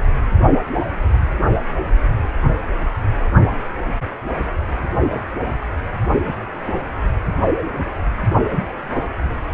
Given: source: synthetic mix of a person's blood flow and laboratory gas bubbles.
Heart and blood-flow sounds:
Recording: Doppler ultrasound of blood flow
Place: precordium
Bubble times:
no bubbles
From the record:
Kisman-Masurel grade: 000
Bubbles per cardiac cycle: 0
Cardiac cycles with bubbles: 0%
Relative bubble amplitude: no bubbles discernible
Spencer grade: 0 (complete lack of bubble signals)

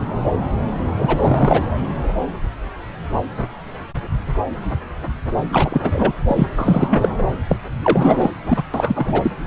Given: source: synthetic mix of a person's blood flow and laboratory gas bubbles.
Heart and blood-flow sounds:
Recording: Doppler ultrasound of blood flow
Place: subclavian vein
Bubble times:
0.99-1.61 s: bubbles
5.50-6.12 s: bubbles
6.27-6.48 s: bubbles
6.57-7.09 s: bubbles
7.18-7.27 s: bubbles
7.49-7.57 s: bubbles
7.77-8.29 s: bubbles
8.46-8.62 s: bubbles
8.73-9.31 s: bubbles
From the record:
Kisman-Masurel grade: 333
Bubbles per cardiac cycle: rolling drumbeat, 9 or more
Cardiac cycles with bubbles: 50 to 99%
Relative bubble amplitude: loud (0.450 to 0.775)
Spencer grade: 3 (all of the cardiac periods contain showers or single bubble signals, but not dominating or overriding the cardiac motion signals)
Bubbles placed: anywhere in the cardiac cycle

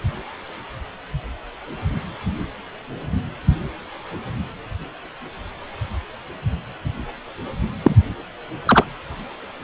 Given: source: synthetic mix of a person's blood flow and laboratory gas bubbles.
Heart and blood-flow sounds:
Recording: Doppler ultrasound of blood flow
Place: precordium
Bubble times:
7.84-7.96 s: bubbles
8.65-8.84 s: bubbles
From the record:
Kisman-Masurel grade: 113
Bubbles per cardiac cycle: 1 to 2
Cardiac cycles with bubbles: 1 to 10%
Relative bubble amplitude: loud (0.450 to 0.775)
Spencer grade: 1 (occasional bubble signal discernible with the cardiac motion signal, with majority of cardiac periods free of bubbles)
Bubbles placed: anywhere in the cardiac cycle

